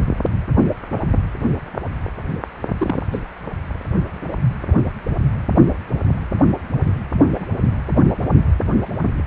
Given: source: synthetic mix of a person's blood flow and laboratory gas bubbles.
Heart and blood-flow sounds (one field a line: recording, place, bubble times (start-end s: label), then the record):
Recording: Doppler ultrasound of blood flow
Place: precordium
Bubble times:
2.78-3.02 s: bubbles
3.12-3.20 s: bubbles
7.20-7.46 s: bubbles
From the record:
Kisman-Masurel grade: 121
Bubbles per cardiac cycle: 1 to 2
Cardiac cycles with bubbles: 10 to 50%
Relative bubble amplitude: barely perceptible (0.100 to 0.250)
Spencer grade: 2 (many but less than half of the cardiac periods contain bubble signals, singularly or in groups)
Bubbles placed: only in the low amplitude regions of the cardiac cycle